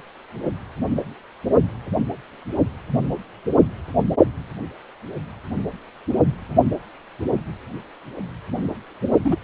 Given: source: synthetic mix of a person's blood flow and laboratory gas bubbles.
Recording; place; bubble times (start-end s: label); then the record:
Doppler ultrasound of blood flow; precordium
9.24-9.35 s: bubbles
From the record:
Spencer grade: 1 (occasional bubble signal discernible with the cardiac motion signal, with majority of cardiac periods free of bubbles); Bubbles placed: only in the low amplitude regions of the cardiac cycle